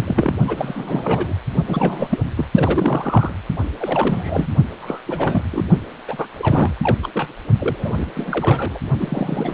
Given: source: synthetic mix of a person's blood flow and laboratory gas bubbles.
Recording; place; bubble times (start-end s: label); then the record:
Doppler ultrasound of blood flow; precordium
0.00-0.34 s: bubbles
0.47-1.34 s: bubbles
1.67-2.19 s: bubbles
2.37-2.45 s: bubbles
2.54-3.33 s: bubbles
3.79-4.47 s: bubbles
4.81-5.00 s: bubbles
5.06-5.43 s: bubbles
5.51-5.67 s: bubbles
6.08-6.27 s: bubbles
6.38-6.75 s: bubbles
6.83-6.97 s: bubbles
7.02-7.08 s: bubbles
7.13-7.27 s: bubbles
7.58-8.10 s: bubbles
8.14-8.79 s: bubbles
8.99-9.54 s: bubbles
From the record:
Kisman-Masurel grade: 342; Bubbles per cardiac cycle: rolling drumbeat, 9 or more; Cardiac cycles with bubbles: 100%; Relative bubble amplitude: moderate (0.250 to 0.450); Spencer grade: 3 (all of the cardiac periods contain showers or single bubble signals, but not dominating or overriding the cardiac motion signals); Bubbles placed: only in the low amplitude regions of the cardiac cycle